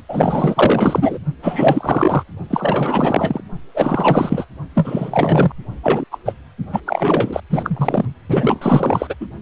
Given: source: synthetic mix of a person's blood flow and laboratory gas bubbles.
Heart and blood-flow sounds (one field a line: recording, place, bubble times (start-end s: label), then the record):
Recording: Doppler ultrasound of blood flow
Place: precordium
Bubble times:
0.08-1.19 s: bubbles
1.42-2.24 s: bubbles
2.50-3.41 s: bubbles
3.74-4.45 s: bubbles
4.74-5.52 s: bubbles
5.83-6.04 s: bubbles
6.11-6.18 s: bubbles
6.25-6.33 s: bubbles
6.72-6.80 s: bubbles
6.86-7.40 s: bubbles
7.49-8.05 s: bubbles
8.29-9.14 s: bubbles
9.20-9.27 s: bubbles
From the record:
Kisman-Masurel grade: 444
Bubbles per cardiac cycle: continuous sound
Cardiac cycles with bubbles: 100%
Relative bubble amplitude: maximal (0.775 to 0.999)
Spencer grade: 4 (maximum detectable bubble signal sounding continuously throughout systole and diastole of every cardiac period, and overriding the amplitude of the normal cardiac signals)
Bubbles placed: only in the low amplitude regions of the cardiac cycle